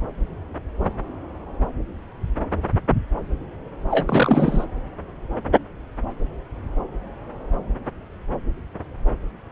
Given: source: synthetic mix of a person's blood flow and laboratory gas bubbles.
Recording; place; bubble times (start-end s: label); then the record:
Doppler ultrasound of blood flow; subclavian vein
3.90-4.65 s: bubbles
From the record:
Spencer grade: 1 (occasional bubble signal discernible with the cardiac motion signal, with majority of cardiac periods free of bubbles); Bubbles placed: anywhere in the cardiac cycle